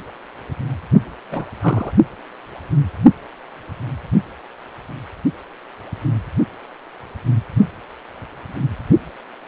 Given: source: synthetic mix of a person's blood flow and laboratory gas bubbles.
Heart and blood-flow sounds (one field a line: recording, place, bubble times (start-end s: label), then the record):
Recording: Doppler ultrasound of blood flow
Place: precordium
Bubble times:
0.92-1.01 s: bubbles
1.30-1.45 s: bubbles
1.60-1.93 s: bubbles
From the record:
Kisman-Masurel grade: 222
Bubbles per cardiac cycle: several, 3 to 8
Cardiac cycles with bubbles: 10 to 50%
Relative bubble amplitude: moderate (0.250 to 0.450)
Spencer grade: 2 (many but less than half of the cardiac periods contain bubble signals, singularly or in groups)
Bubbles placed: only in the low amplitude regions of the cardiac cycle